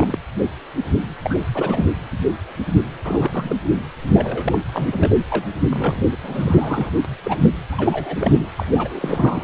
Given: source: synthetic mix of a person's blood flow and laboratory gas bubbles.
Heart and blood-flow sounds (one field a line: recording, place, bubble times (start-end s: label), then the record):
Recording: Doppler ultrasound of blood flow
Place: precordium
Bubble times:
0.00-0.19 s: bubbles
1.22-1.46 s: bubbles
1.54-1.86 s: bubbles
3.04-3.56 s: bubbles
3.64-3.70 s: bubbles
4.13-4.58 s: bubbles
4.72-5.15 s: bubbles
5.29-5.44 s: bubbles
5.71-6.04 s: bubbles
6.12-6.17 s: bubbles
6.22-6.91 s: bubbles
7.04-7.08 s: bubbles
7.23-7.38 s: bubbles
7.42-7.50 s: bubbles
7.71-8.47 s: bubbles
8.55-9.44 s: bubbles
From the record:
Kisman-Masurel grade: 332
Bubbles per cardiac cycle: rolling drumbeat, 9 or more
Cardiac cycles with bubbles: 50 to 99%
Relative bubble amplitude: moderate (0.250 to 0.450)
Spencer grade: 3 (all of the cardiac periods contain showers or single bubble signals, but not dominating or overriding the cardiac motion signals)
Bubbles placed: anywhere in the cardiac cycle